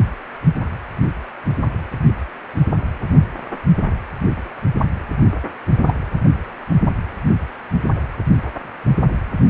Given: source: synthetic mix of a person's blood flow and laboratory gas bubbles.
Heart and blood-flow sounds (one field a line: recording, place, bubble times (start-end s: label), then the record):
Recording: Doppler ultrasound of blood flow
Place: precordium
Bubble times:
5.87-5.93 s: bubbles
From the record:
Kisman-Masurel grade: 112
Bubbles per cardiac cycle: 1 to 2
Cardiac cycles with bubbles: 1 to 10%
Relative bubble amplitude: moderate (0.250 to 0.450)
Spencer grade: 1 (occasional bubble signal discernible with the cardiac motion signal, with majority of cardiac periods free of bubbles)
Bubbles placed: anywhere in the cardiac cycle